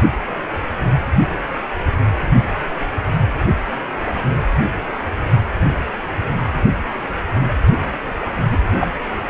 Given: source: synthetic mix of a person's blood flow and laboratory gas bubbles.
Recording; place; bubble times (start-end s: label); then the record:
Doppler ultrasound of blood flow; precordium
8.52-8.58 s: bubbles
8.78-8.88 s: bubbles
From the record:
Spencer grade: 1 (occasional bubble signal discernible with the cardiac motion signal, with majority of cardiac periods free of bubbles); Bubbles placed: anywhere in the cardiac cycle